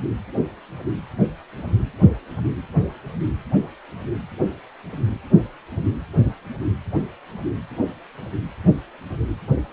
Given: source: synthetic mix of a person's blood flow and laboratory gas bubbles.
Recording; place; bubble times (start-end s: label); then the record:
Doppler ultrasound of blood flow; precordium
no bubbles
From the record:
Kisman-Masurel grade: 000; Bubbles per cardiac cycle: 0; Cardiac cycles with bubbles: 0%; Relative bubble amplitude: no bubbles discernible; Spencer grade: 0 (complete lack of bubble signals)